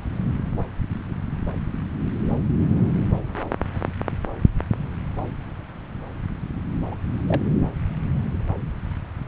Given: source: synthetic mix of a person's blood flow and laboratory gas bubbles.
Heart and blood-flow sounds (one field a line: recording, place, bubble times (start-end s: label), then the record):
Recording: Doppler ultrasound of blood flow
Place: subclavian vein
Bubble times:
2.75-2.81 s: bubbles
6.91-6.95 s: bubbles
7.26-7.42 s: bubbles
From the record:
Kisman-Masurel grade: 122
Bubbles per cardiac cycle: 1 to 2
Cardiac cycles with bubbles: 10 to 50%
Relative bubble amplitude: moderate (0.250 to 0.450)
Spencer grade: 2 (many but less than half of the cardiac periods contain bubble signals, singularly or in groups)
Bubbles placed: anywhere in the cardiac cycle